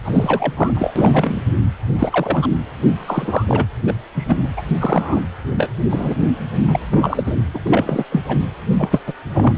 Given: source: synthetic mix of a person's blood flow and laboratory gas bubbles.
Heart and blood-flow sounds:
Doppler ultrasound of blood flow; precordium
0.04-0.54 s: bubbles
0.56-0.92 s: bubbles
0.95-1.41 s: bubbles
1.99-2.50 s: bubbles
3.08-3.67 s: bubbles
3.87-3.94 s: bubbles
4.16-4.50 s: bubbles
4.57-4.62 s: bubbles
4.80-5.22 s: bubbles
5.55-5.70 s: bubbles
5.87-6.15 s: bubbles
6.67-6.85 s: bubbles
6.90-7.23 s: bubbles
7.26-7.36 s: bubbles
7.54-7.59 s: bubbles
7.66-8.04 s: bubbles
8.12-8.21 s: bubbles
8.28-8.36 s: bubbles
8.79-9.00 s: bubbles
9.06-9.13 s: bubbles
9.32-9.54 s: bubbles
From the record:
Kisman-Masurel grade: 242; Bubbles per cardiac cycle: several, 3 to 8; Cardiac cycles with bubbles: 100%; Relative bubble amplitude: moderate (0.250 to 0.450); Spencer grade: 3 (all of the cardiac periods contain showers or single bubble signals, but not dominating or overriding the cardiac motion signals); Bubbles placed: anywhere in the cardiac cycle

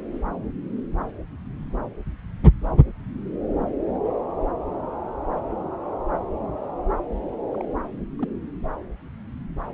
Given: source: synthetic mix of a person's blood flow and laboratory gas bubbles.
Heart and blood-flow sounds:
Doppler ultrasound of blood flow; subclavian vein
7.52-7.68 s: bubbles
8.19-8.28 s: bubbles
From the record:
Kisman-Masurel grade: 111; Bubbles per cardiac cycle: 1 to 2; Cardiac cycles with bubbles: 1 to 10%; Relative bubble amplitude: barely perceptible (0.100 to 0.250); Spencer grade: 1 (occasional bubble signal discernible with the cardiac motion signal, with majority of cardiac periods free of bubbles); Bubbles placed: anywhere in the cardiac cycle

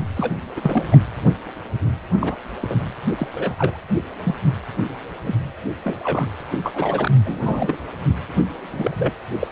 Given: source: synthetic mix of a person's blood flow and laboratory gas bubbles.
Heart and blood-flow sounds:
Doppler ultrasound of blood flow; precordium
0.15-0.36 s: bubbles
0.56-0.85 s: bubbles
0.91-0.98 s: bubbles
2.21-2.35 s: bubbles
2.62-2.75 s: bubbles
3.17-3.27 s: bubbles
3.32-3.78 s: bubbles
4.25-4.35 s: bubbles
5.24-5.36 s: bubbles
5.85-5.99 s: bubbles
6.04-6.27 s: bubbles
6.40-6.44 s: bubbles
6.51-6.59 s: bubbles
6.63-7.12 s: bubbles
7.25-7.78 s: bubbles
8.72-8.95 s: bubbles
8.98-9.13 s: bubbles
9.39-9.47 s: bubbles
From the record:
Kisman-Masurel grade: 232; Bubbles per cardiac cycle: several, 3 to 8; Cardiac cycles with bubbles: 50 to 99%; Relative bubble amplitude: moderate (0.250 to 0.450); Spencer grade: 3 (all of the cardiac periods contain showers or single bubble signals, but not dominating or overriding the cardiac motion signals); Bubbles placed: anywhere in the cardiac cycle

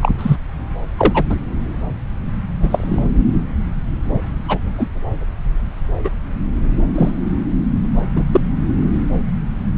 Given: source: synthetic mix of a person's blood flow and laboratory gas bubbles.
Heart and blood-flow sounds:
Doppler ultrasound of blood flow; subclavian vein
0.02-0.12 s: bubbles
0.18-0.36 s: bubbles
0.97-1.23 s: bubbles
1.29-1.36 s: bubbles
2.62-3.02 s: bubbles
4.48-4.58 s: bubbles
4.77-4.88 s: bubbles
6.04-6.09 s: bubbles
6.95-7.10 s: bubbles
8.15-8.24 s: bubbles
8.31-8.40 s: bubbles
From the record:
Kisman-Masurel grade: 123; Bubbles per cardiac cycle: 1 to 2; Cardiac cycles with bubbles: 10 to 50%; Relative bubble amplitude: loud (0.450 to 0.775); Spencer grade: 2 (many but less than half of the cardiac periods contain bubble signals, singularly or in groups); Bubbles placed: anywhere in the cardiac cycle

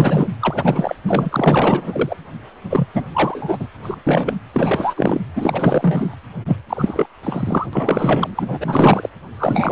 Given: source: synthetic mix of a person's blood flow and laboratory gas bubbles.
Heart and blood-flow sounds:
Doppler ultrasound of blood flow; precordium
0.00-0.30 s: bubbles
0.40-0.96 s: bubbles
1.07-2.17 s: bubbles
2.70-2.88 s: bubbles
2.93-3.04 s: bubbles
3.13-3.67 s: bubbles
3.83-3.96 s: bubbles
4.07-4.36 s: bubbles
4.53-5.21 s: bubbles
5.36-6.16 s: bubbles
6.48-6.57 s: bubbles
6.69-7.06 s: bubbles
7.23-7.67 s: bubbles
7.73-9.10 s: bubbles
9.37-9.72 s: bubbles
From the record:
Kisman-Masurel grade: 444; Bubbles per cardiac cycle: continuous sound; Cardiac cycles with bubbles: 100%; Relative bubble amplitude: maximal (0.775 to 0.999); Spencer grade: 4 (maximum detectable bubble signal sounding continuously throughout systole and diastole of every cardiac period, and overriding the amplitude of the normal cardiac signals); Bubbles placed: anywhere in the cardiac cycle

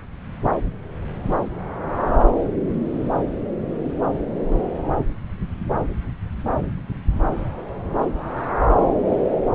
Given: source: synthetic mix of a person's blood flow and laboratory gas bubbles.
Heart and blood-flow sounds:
Doppler ultrasound of blood flow; subclavian vein
no bubbles
From the record:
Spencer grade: 0 (complete lack of bubble signals)

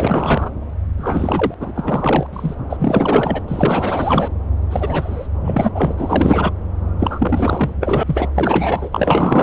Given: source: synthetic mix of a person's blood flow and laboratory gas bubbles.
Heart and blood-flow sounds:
Doppler ultrasound of blood flow; subclavian vein
0.00-0.52 s: bubbles
0.97-1.54 s: bubbles
1.60-1.73 s: bubbles
1.75-2.27 s: bubbles
2.32-2.54 s: bubbles
2.69-3.42 s: bubbles
3.48-4.28 s: bubbles
4.70-5.28 s: bubbles
5.40-5.69 s: bubbles
5.75-5.94 s: bubbles
5.97-6.51 s: bubbles
7.00-7.74 s: bubbles
7.80-8.04 s: bubbles
8.07-8.29 s: bubbles
8.34-8.89 s: bubbles
8.92-9.43 s: bubbles
From the record:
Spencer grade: 4 (maximum detectable bubble signal sounding continuously throughout systole and diastole of every cardiac period, and overriding the amplitude of the normal cardiac signals); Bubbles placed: anywhere in the cardiac cycle

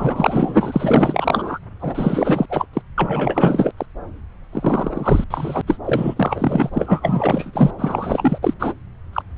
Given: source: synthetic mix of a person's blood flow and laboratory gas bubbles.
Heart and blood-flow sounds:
Doppler ultrasound of blood flow; subclavian vein
0.00-1.59 s: bubbles
1.79-2.46 s: bubbles
2.49-2.67 s: bubbles
2.73-2.81 s: bubbles
2.98-3.72 s: bubbles
3.77-3.86 s: bubbles
4.53-5.24 s: bubbles
5.30-5.62 s: bubbles
5.67-5.78 s: bubbles
5.84-6.70 s: bubbles
6.72-7.71 s: bubbles
7.79-8.38 s: bubbles
8.42-8.54 s: bubbles
8.59-8.73 s: bubbles
9.13-9.22 s: bubbles
9.36-9.38 s: bubbles
From the record:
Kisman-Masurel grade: 444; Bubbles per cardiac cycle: continuous sound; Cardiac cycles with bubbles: 100%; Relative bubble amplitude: maximal (0.775 to 0.999); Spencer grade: 4 (maximum detectable bubble signal sounding continuously throughout systole and diastole of every cardiac period, and overriding the amplitude of the normal cardiac signals); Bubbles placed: anywhere in the cardiac cycle

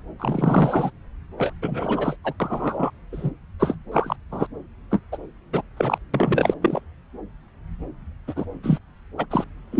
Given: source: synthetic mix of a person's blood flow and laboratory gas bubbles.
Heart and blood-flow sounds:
Doppler ultrasound of blood flow; subclavian vein
0.20-0.90 s: bubbles
1.38-1.52 s: bubbles
1.62-2.16 s: bubbles
2.24-2.33 s: bubbles
2.40-2.90 s: bubbles
3.12-3.32 s: bubbles
3.59-3.74 s: bubbles
3.91-4.16 s: bubbles
4.31-4.46 s: bubbles
4.91-5.00 s: bubbles
5.12-5.18 s: bubbles
5.53-5.62 s: bubbles
5.77-5.98 s: bubbles
6.14-6.54 s: bubbles
6.62-6.80 s: bubbles
8.28-8.45 s: bubbles
8.63-8.79 s: bubbles
9.18-9.26 s: bubbles
9.30-9.44 s: bubbles
9.72-9.80 s: bubbles
From the record:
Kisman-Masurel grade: 232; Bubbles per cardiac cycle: several, 3 to 8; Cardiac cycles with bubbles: 50 to 99%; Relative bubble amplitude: moderate (0.250 to 0.450); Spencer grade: 3 (all of the cardiac periods contain showers or single bubble signals, but not dominating or overriding the cardiac motion signals); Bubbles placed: anywhere in the cardiac cycle

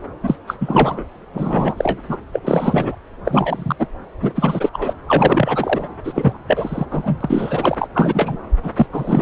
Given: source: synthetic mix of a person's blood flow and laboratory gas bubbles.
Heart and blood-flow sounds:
Doppler ultrasound of blood flow; subclavian vein
0.22-0.37 s: bubbles
0.47-0.55 s: bubbles
0.60-1.04 s: bubbles
1.33-1.74 s: bubbles
1.77-2.01 s: bubbles
2.08-2.18 s: bubbles
2.33-2.39 s: bubbles
2.44-2.96 s: bubbles
3.24-3.76 s: bubbles
3.79-3.88 s: bubbles
4.21-4.32 s: bubbles
4.35-4.69 s: bubbles
4.73-4.93 s: bubbles
5.07-5.88 s: bubbles
6.04-6.38 s: bubbles
6.47-6.85 s: bubbles
6.91-7.17 s: bubbles
7.21-7.75 s: bubbles
7.78-7.88 s: bubbles
7.94-8.36 s: bubbles
8.63-8.71 s: bubbles
8.75-8.86 s: bubbles
8.92-9.22 s: bubbles
From the record:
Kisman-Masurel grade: 343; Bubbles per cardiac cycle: rolling drumbeat, 9 or more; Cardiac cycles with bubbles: 100%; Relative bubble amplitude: loud (0.450 to 0.775); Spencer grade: 3 (all of the cardiac periods contain showers or single bubble signals, but not dominating or overriding the cardiac motion signals); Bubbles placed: anywhere in the cardiac cycle

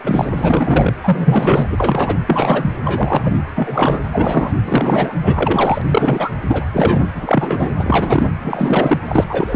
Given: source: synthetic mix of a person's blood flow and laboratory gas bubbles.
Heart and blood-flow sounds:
Doppler ultrasound of blood flow; precordium
0.04-0.30 s: bubbles
0.36-0.93 s: bubbles
1.03-1.65 s: bubbles
1.70-2.18 s: bubbles
2.27-2.74 s: bubbles
2.84-3.43 s: bubbles
3.55-4.00 s: bubbles
4.12-4.52 s: bubbles
4.64-5.13 s: bubbles
5.23-5.81 s: bubbles
5.88-6.32 s: bubbles
6.48-6.65 s: bubbles
6.73-7.04 s: bubbles
7.15-7.71 s: bubbles
7.76-8.27 s: bubbles
8.41-8.97 s: bubbles
9.05-9.25 s: bubbles
9.29-9.56 s: bubbles
From the record:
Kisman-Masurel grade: 343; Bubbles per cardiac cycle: rolling drumbeat, 9 or more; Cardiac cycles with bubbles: 100%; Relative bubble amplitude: loud (0.450 to 0.775); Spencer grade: 3 (all of the cardiac periods contain showers or single bubble signals, but not dominating or overriding the cardiac motion signals); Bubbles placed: anywhere in the cardiac cycle

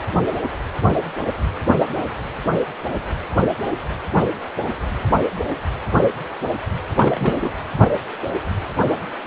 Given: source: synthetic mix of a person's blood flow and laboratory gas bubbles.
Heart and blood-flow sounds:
Doppler ultrasound of blood flow; precordium
6.90-7.52 s: bubbles
From the record:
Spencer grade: 1 (occasional bubble signal discernible with the cardiac motion signal, with majority of cardiac periods free of bubbles); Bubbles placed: anywhere in the cardiac cycle

